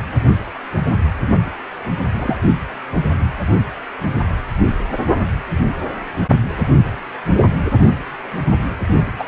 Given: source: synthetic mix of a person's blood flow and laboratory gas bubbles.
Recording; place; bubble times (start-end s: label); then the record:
Doppler ultrasound of blood flow; precordium
2.19-2.37 s: bubbles
9.19-9.24 s: bubbles
From the record:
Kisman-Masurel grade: 122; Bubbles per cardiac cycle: 1 to 2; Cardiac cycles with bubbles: 10 to 50%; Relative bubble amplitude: moderate (0.250 to 0.450); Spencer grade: 2 (many but less than half of the cardiac periods contain bubble signals, singularly or in groups); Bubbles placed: only in the low amplitude regions of the cardiac cycle